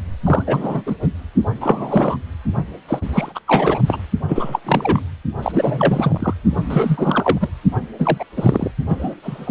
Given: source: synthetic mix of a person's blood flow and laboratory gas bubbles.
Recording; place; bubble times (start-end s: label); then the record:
Doppler ultrasound of blood flow; precordium
0.26-0.43 s: bubbles
0.47-0.81 s: bubbles
0.86-0.95 s: bubbles
1.02-1.07 s: bubbles
1.60-2.17 s: bubbles
2.88-3.03 s: bubbles
3.12-3.32 s: bubbles
3.35-3.39 s: bubbles
3.47-3.79 s: bubbles
3.87-3.99 s: bubbles
4.28-4.59 s: bubbles
4.66-5.00 s: bubbles
5.42-6.34 s: bubbles
6.65-7.50 s: bubbles
7.98-8.25 s: bubbles
8.36-8.71 s: bubbles
8.88-9.15 s: bubbles
9.22-9.51 s: bubbles
From the record:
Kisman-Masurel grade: 343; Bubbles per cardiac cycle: rolling drumbeat, 9 or more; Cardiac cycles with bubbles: 100%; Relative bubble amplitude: loud (0.450 to 0.775); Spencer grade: 3 (all of the cardiac periods contain showers or single bubble signals, but not dominating or overriding the cardiac motion signals); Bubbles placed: only in the low amplitude regions of the cardiac cycle